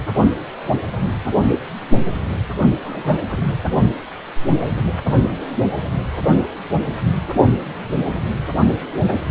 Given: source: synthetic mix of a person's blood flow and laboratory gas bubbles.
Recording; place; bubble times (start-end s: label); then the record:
Doppler ultrasound of blood flow; precordium
2.82-3.24 s: bubbles
3.26-3.46 s: bubbles
From the record:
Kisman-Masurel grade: 221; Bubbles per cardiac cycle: several, 3 to 8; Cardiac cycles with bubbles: 10 to 50%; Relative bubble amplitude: barely perceptible (0.100 to 0.250); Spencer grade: 2 (many but less than half of the cardiac periods contain bubble signals, singularly or in groups); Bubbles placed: only in the low amplitude regions of the cardiac cycle